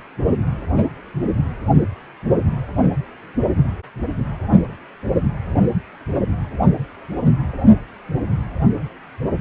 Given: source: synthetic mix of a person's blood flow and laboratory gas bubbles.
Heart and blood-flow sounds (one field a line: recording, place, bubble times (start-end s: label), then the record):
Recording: Doppler ultrasound of blood flow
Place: precordium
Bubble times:
5.54-5.59 s: bubbles
From the record:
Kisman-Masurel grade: 111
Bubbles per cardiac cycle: 1 to 2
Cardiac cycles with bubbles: 1 to 10%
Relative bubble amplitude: barely perceptible (0.100 to 0.250)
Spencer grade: 1 (occasional bubble signal discernible with the cardiac motion signal, with majority of cardiac periods free of bubbles)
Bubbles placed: anywhere in the cardiac cycle